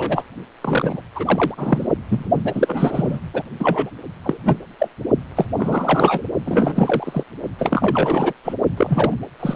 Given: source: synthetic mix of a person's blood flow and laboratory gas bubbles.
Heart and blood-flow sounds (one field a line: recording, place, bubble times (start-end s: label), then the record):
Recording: Doppler ultrasound of blood flow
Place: precordium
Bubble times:
0.00-0.24 s: bubbles
0.62-1.01 s: bubbles
1.15-1.55 s: bubbles
1.57-1.87 s: bubbles
2.10-2.31 s: bubbles
2.44-3.20 s: bubbles
3.33-3.43 s: bubbles
3.60-3.90 s: bubbles
4.23-4.38 s: bubbles
4.43-4.57 s: bubbles
4.79-4.88 s: bubbles
5.36-5.46 s: bubbles
5.56-6.23 s: bubbles
6.45-7.24 s: bubbles
7.58-8.34 s: bubbles
8.44-8.54 s: bubbles
8.77-9.14 s: bubbles
9.40-9.56 s: bubbles
From the record:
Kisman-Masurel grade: 333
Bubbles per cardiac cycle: rolling drumbeat, 9 or more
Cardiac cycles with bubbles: 50 to 99%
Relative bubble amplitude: loud (0.450 to 0.775)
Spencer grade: 3 (all of the cardiac periods contain showers or single bubble signals, but not dominating or overriding the cardiac motion signals)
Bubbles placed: only in the low amplitude regions of the cardiac cycle